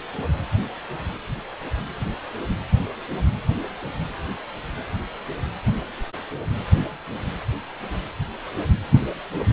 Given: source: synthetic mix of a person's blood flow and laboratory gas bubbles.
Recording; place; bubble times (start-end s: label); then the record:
Doppler ultrasound of blood flow; precordium
no bubbles
From the record:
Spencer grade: 0 (complete lack of bubble signals)